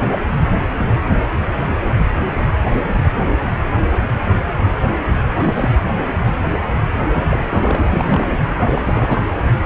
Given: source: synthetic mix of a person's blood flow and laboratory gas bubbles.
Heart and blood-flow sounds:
Doppler ultrasound of blood flow; precordium
5.32-5.75 s: bubbles
7.12-7.24 s: bubbles
7.31-7.79 s: bubbles
7.83-8.31 s: bubbles
8.48-9.22 s: bubbles
From the record:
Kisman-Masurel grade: 222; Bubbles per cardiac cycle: several, 3 to 8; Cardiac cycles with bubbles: 10 to 50%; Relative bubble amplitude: moderate (0.250 to 0.450); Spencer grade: 2 (many but less than half of the cardiac periods contain bubble signals, singularly or in groups); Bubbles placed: anywhere in the cardiac cycle

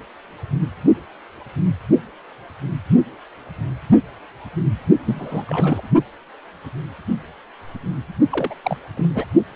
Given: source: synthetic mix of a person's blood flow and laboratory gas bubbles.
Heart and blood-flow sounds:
Doppler ultrasound of blood flow; precordium
5.06-5.45 s: bubbles
5.49-5.81 s: bubbles
8.31-8.55 s: bubbles
8.63-8.77 s: bubbles
8.97-9.08 s: bubbles
9.14-9.26 s: bubbles
From the record:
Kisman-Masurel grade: 222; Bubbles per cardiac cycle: several, 3 to 8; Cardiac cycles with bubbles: 10 to 50%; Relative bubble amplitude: moderate (0.250 to 0.450); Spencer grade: 2 (many but less than half of the cardiac periods contain bubble signals, singularly or in groups); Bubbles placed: only in the low amplitude regions of the cardiac cycle

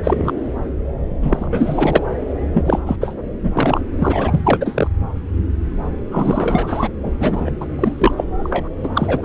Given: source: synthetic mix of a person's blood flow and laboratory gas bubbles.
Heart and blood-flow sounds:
Doppler ultrasound of blood flow; subclavian vein
0.00-0.32 s: bubbles
1.22-2.02 s: bubbles
2.54-2.96 s: bubbles
3.00-3.16 s: bubbles
3.43-3.51 s: bubbles
3.54-3.81 s: bubbles
3.98-4.40 s: bubbles
4.43-4.88 s: bubbles
6.10-6.88 s: bubbles
7.03-7.11 s: bubbles
7.19-7.51 s: bubbles
7.60-7.66 s: bubbles
7.78-8.14 s: bubbles
8.17-8.24 s: bubbles
8.39-8.69 s: bubbles
8.83-8.88 s: bubbles
8.95-9.25 s: bubbles
From the record:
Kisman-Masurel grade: 343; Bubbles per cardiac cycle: rolling drumbeat, 9 or more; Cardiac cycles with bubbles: 100%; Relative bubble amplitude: loud (0.450 to 0.775); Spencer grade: 3 (all of the cardiac periods contain showers or single bubble signals, but not dominating or overriding the cardiac motion signals); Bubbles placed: anywhere in the cardiac cycle

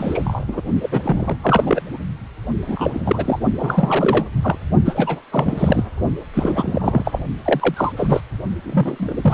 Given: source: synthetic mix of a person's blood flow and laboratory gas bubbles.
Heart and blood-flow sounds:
Doppler ultrasound of blood flow; precordium
0.00-0.45 s: bubbles
0.47-0.61 s: bubbles
0.82-0.89 s: bubbles
0.91-1.37 s: bubbles
1.42-1.82 s: bubbles
2.67-3.39 s: bubbles
3.58-4.25 s: bubbles
4.42-4.57 s: bubbles
4.85-5.21 s: bubbles
5.32-5.83 s: bubbles
6.33-7.19 s: bubbles
7.44-7.93 s: bubbles
7.96-8.21 s: bubbles
8.62-9.13 s: bubbles
9.17-9.34 s: bubbles
From the record:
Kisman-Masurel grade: 343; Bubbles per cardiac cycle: rolling drumbeat, 9 or more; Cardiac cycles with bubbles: 100%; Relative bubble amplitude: loud (0.450 to 0.775); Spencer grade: 3 (all of the cardiac periods contain showers or single bubble signals, but not dominating or overriding the cardiac motion signals); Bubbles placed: only in the low amplitude regions of the cardiac cycle

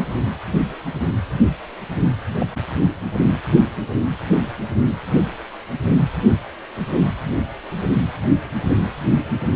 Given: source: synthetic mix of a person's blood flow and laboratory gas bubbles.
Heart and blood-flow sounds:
Doppler ultrasound of blood flow; precordium
2.34-2.46 s: bubbles
From the record:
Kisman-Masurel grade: 111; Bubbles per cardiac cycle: 1 to 2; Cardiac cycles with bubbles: 1 to 10%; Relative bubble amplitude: barely perceptible (0.100 to 0.250); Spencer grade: 1 (occasional bubble signal discernible with the cardiac motion signal, with majority of cardiac periods free of bubbles); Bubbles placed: anywhere in the cardiac cycle

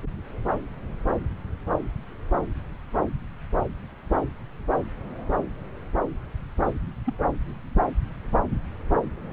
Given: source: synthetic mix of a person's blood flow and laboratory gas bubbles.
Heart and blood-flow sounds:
Doppler ultrasound of blood flow; subclavian vein
6.64-6.73 s: bubbles
7.05-7.15 s: bubbles
From the record:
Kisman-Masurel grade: 111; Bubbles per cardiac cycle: 1 to 2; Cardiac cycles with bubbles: 1 to 10%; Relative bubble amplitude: barely perceptible (0.100 to 0.250); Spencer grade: 1 (occasional bubble signal discernible with the cardiac motion signal, with majority of cardiac periods free of bubbles); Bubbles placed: anywhere in the cardiac cycle

